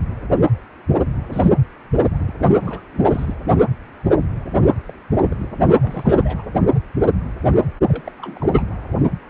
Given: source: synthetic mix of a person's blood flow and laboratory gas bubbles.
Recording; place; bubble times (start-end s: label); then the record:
Doppler ultrasound of blood flow; precordium
1.29-1.52 s: bubbles
1.93-2.33 s: bubbles
2.62-2.81 s: bubbles
2.92-3.00 s: bubbles
3.12-3.36 s: bubbles
4.87-4.92 s: bubbles
5.22-5.35 s: bubbles
5.39-5.49 s: bubbles
5.67-6.43 s: bubbles
7.88-8.01 s: bubbles
8.06-8.10 s: bubbles
8.19-8.62 s: bubbles
From the record:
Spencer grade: 2 (many but less than half of the cardiac periods contain bubble signals, singularly or in groups); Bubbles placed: anywhere in the cardiac cycle